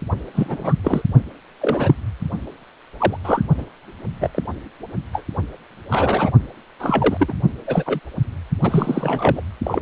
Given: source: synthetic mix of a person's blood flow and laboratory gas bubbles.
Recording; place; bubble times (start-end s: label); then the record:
Doppler ultrasound of blood flow; precordium
0.33-0.74 s: bubbles
0.83-1.02 s: bubbles
1.61-1.94 s: bubbles
3.00-3.17 s: bubbles
3.24-3.42 s: bubbles
3.58-3.66 s: bubbles
4.20-4.31 s: bubbles
4.35-4.42 s: bubbles
5.12-5.25 s: bubbles
5.91-6.31 s: bubbles
6.79-7.33 s: bubbles
7.67-7.83 s: bubbles
7.86-8.00 s: bubbles
8.62-9.42 s: bubbles
9.63-9.82 s: bubbles
From the record:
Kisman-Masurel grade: 243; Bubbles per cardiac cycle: several, 3 to 8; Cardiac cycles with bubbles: 100%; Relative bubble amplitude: loud (0.450 to 0.775); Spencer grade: 3 (all of the cardiac periods contain showers or single bubble signals, but not dominating or overriding the cardiac motion signals); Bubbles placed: only in the low amplitude regions of the cardiac cycle